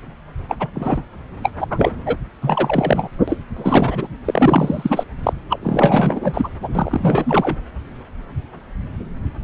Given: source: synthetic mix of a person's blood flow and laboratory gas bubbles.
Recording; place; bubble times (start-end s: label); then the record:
Doppler ultrasound of blood flow; subclavian vein
0.48-0.55 s: bubbles
0.59-0.67 s: bubbles
0.74-1.03 s: bubbles
1.42-1.50 s: bubbles
1.58-1.67 s: bubbles
1.70-1.92 s: bubbles
2.06-2.17 s: bubbles
2.42-3.10 s: bubbles
3.27-3.39 s: bubbles
3.56-4.08 s: bubbles
4.25-5.07 s: bubbles
5.23-5.33 s: bubbles
5.49-5.60 s: bubbles
5.62-6.49 s: bubbles
6.62-6.69 s: bubbles
6.75-7.57 s: bubbles
From the record:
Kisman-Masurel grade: 333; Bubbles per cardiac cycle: rolling drumbeat, 9 or more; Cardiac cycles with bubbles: 50 to 99%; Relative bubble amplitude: loud (0.450 to 0.775); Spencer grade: 3 (all of the cardiac periods contain showers or single bubble signals, but not dominating or overriding the cardiac motion signals); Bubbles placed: anywhere in the cardiac cycle